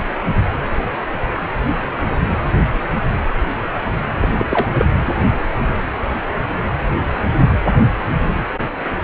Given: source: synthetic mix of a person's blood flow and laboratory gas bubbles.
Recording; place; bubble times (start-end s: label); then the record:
Doppler ultrasound of blood flow; precordium
4.21-4.28 s: bubbles
4.38-4.46 s: bubbles
4.50-4.66 s: bubbles
4.78-4.85 s: bubbles
From the record:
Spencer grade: 1 (occasional bubble signal discernible with the cardiac motion signal, with majority of cardiac periods free of bubbles); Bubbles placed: anywhere in the cardiac cycle